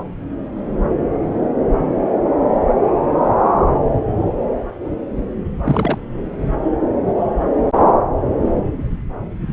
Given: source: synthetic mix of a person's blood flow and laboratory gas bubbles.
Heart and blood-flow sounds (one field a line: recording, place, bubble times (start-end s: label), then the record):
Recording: Doppler ultrasound of blood flow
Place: subclavian vein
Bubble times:
5.64-5.98 s: bubbles
From the record:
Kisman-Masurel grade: 212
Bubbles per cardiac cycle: several, 3 to 8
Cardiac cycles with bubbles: 1 to 10%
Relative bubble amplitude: moderate (0.250 to 0.450)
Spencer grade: 1 (occasional bubble signal discernible with the cardiac motion signal, with majority of cardiac periods free of bubbles)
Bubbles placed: anywhere in the cardiac cycle